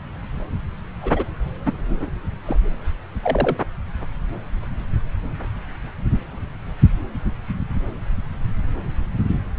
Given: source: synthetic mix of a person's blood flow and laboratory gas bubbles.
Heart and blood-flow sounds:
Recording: Doppler ultrasound of blood flow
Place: subclavian vein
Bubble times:
1.01-1.25 s: bubbles
1.66-1.73 s: bubbles
1.88-2.09 s: bubbles
2.45-2.58 s: bubbles
3.22-3.57 s: bubbles
From the record:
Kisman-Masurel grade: 122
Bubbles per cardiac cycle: 1 to 2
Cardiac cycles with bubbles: 10 to 50%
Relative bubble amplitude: moderate (0.250 to 0.450)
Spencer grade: 2 (many but less than half of the cardiac periods contain bubble signals, singularly or in groups)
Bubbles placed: anywhere in the cardiac cycle

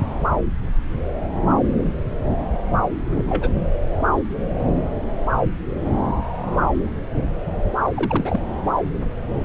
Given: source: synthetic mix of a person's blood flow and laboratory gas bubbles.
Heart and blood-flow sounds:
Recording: Doppler ultrasound of blood flow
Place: subclavian vein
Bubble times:
3.17-3.52 s: bubbles
7.95-8.40 s: bubbles
From the record:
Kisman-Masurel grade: 211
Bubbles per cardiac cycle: several, 3 to 8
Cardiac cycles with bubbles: 1 to 10%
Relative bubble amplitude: barely perceptible (0.100 to 0.250)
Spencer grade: 1 (occasional bubble signal discernible with the cardiac motion signal, with majority of cardiac periods free of bubbles)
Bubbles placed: anywhere in the cardiac cycle

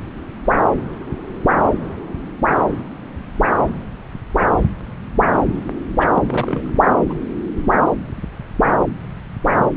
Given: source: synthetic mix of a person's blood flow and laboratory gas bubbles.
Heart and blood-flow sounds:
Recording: Doppler ultrasound of blood flow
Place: subclavian vein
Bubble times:
6.00-6.05 s: bubbles
6.08-6.73 s: bubbles
7.09-7.13 s: bubbles
From the record:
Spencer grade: 2 (many but less than half of the cardiac periods contain bubble signals, singularly or in groups)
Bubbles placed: anywhere in the cardiac cycle

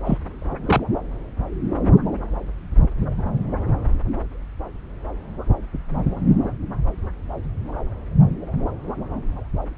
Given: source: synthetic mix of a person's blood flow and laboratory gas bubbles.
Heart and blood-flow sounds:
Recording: Doppler ultrasound of blood flow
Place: subclavian vein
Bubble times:
0.05-0.18 s: bubbles
0.65-0.81 s: bubbles
From the record:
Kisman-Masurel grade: 112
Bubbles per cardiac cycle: 1 to 2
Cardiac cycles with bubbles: 1 to 10%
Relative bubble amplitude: moderate (0.250 to 0.450)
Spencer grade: 1 (occasional bubble signal discernible with the cardiac motion signal, with majority of cardiac periods free of bubbles)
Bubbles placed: anywhere in the cardiac cycle

